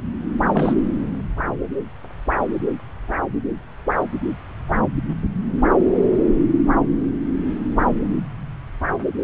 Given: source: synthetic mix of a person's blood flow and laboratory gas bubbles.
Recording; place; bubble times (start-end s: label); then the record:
Doppler ultrasound of blood flow; subclavian vein
0.53-0.74 s: bubbles
1.46-1.55 s: bubbles
From the record:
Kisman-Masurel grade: 212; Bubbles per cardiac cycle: several, 3 to 8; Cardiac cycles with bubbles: 1 to 10%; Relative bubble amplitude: moderate (0.250 to 0.450); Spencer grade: 1 (occasional bubble signal discernible with the cardiac motion signal, with majority of cardiac periods free of bubbles); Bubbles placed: anywhere in the cardiac cycle